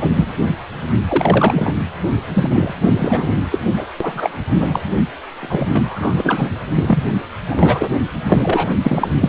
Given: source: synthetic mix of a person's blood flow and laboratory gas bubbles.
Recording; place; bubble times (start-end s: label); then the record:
Doppler ultrasound of blood flow; precordium
0.00-0.34 s: bubbles
1.09-1.73 s: bubbles
2.33-2.74 s: bubbles
2.83-3.32 s: bubbles
3.50-3.61 s: bubbles
3.76-3.88 s: bubbles
4.00-4.39 s: bubbles
4.50-4.80 s: bubbles
5.39-6.54 s: bubbles
6.75-7.03 s: bubbles
7.48-7.89 s: bubbles
8.23-8.72 s: bubbles
8.83-9.08 s: bubbles
9.21-9.29 s: bubbles
From the record:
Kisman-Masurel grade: 343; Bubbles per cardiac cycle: rolling drumbeat, 9 or more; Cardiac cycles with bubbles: 100%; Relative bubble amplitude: loud (0.450 to 0.775); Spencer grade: 3 (all of the cardiac periods contain showers or single bubble signals, but not dominating or overriding the cardiac motion signals); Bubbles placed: anywhere in the cardiac cycle